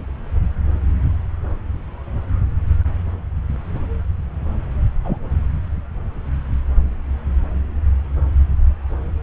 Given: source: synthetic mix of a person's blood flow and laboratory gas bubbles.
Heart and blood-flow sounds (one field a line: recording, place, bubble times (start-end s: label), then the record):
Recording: Doppler ultrasound of blood flow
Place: subclavian vein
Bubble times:
5.04-5.17 s: bubbles
From the record:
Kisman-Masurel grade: 113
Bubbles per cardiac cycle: 1 to 2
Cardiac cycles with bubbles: 1 to 10%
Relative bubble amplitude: loud (0.450 to 0.775)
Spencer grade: 1 (occasional bubble signal discernible with the cardiac motion signal, with majority of cardiac periods free of bubbles)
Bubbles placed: anywhere in the cardiac cycle